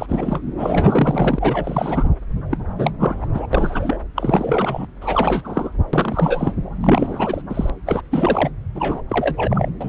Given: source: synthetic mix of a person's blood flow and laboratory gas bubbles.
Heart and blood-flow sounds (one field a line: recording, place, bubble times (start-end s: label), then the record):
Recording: Doppler ultrasound of blood flow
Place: subclavian vein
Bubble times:
0.00-0.50 s: bubbles
0.58-2.09 s: bubbles
2.50-2.57 s: bubbles
2.78-2.91 s: bubbles
3.00-3.15 s: bubbles
3.21-3.27 s: bubbles
3.33-3.46 s: bubbles
3.53-3.99 s: bubbles
4.16-4.87 s: bubbles
5.01-5.70 s: bubbles
5.93-6.52 s: bubbles
6.81-7.42 s: bubbles
7.49-7.70 s: bubbles
7.86-8.01 s: bubbles
8.11-8.50 s: bubbles
8.75-9.01 s: bubbles
9.09-9.70 s: bubbles
9.80-9.89 s: bubbles
From the record:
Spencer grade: 3 (all of the cardiac periods contain showers or single bubble signals, but not dominating or overriding the cardiac motion signals)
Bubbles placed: anywhere in the cardiac cycle